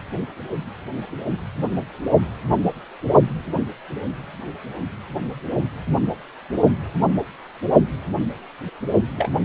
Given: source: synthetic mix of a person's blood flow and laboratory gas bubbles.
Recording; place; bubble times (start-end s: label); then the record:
Doppler ultrasound of blood flow; precordium
9.16-9.29 s: bubbles
From the record:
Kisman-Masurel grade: 211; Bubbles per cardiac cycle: several, 3 to 8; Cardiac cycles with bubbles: 1 to 10%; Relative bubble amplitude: barely perceptible (0.100 to 0.250); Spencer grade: 1 (occasional bubble signal discernible with the cardiac motion signal, with majority of cardiac periods free of bubbles); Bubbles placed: anywhere in the cardiac cycle